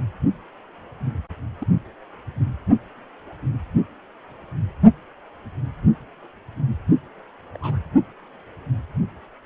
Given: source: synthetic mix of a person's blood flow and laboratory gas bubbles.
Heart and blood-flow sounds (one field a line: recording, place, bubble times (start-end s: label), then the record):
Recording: Doppler ultrasound of blood flow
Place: precordium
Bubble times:
1.60-1.65 s: bubbles
7.54-7.58 s: bubbles
7.60-7.78 s: bubbles
From the record:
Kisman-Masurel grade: 121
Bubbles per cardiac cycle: 1 to 2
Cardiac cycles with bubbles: 10 to 50%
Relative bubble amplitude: barely perceptible (0.100 to 0.250)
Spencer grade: 2 (many but less than half of the cardiac periods contain bubble signals, singularly or in groups)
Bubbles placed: only in the low amplitude regions of the cardiac cycle